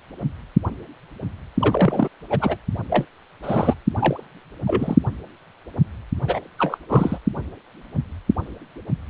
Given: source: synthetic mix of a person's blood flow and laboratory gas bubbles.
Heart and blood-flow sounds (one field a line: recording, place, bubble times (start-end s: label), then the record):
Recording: Doppler ultrasound of blood flow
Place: precordium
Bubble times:
1.58-2.08 s: bubbles
2.29-2.56 s: bubbles
2.90-3.05 s: bubbles
3.42-3.74 s: bubbles
3.97-4.25 s: bubbles
4.66-4.96 s: bubbles
6.26-6.39 s: bubbles
6.58-6.78 s: bubbles
6.89-7.19 s: bubbles
From the record:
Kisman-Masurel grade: 222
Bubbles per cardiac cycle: several, 3 to 8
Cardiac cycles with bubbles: 10 to 50%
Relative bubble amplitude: moderate (0.250 to 0.450)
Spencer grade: 2 (many but less than half of the cardiac periods contain bubble signals, singularly or in groups)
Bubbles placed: anywhere in the cardiac cycle